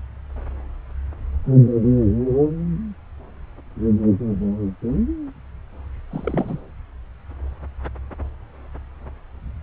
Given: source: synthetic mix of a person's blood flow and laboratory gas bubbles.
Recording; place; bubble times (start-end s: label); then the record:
Doppler ultrasound of blood flow; subclavian vein
6.11-6.60 s: bubbles
From the record:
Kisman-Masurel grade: 211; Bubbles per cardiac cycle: several, 3 to 8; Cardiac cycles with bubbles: 1 to 10%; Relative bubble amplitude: barely perceptible (0.100 to 0.250); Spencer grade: 1 (occasional bubble signal discernible with the cardiac motion signal, with majority of cardiac periods free of bubbles); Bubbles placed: anywhere in the cardiac cycle